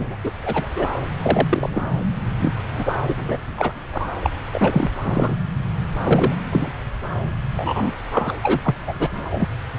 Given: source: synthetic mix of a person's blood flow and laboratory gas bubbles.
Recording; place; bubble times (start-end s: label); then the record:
Doppler ultrasound of blood flow; subclavian vein
0.00-0.18 s: bubbles
0.24-0.31 s: bubbles
0.42-0.66 s: bubbles
0.76-0.87 s: bubbles
1.22-1.88 s: bubbles
2.38-2.54 s: bubbles
2.57-2.94 s: bubbles
3.08-3.38 s: bubbles
3.57-3.73 s: bubbles
3.92-4.07 s: bubbles
4.22-4.30 s: bubbles
4.52-4.90 s: bubbles
5.04-5.35 s: bubbles
6.04-6.33 s: bubbles
6.51-6.71 s: bubbles
7.54-7.93 s: bubbles
8.12-8.32 s: bubbles
8.42-8.60 s: bubbles
8.64-8.75 s: bubbles
8.87-8.94 s: bubbles
8.99-9.48 s: bubbles
From the record:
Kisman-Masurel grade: 243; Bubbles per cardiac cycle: several, 3 to 8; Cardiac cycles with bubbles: 100%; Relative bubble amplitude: loud (0.450 to 0.775); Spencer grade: 3 (all of the cardiac periods contain showers or single bubble signals, but not dominating or overriding the cardiac motion signals); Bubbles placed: anywhere in the cardiac cycle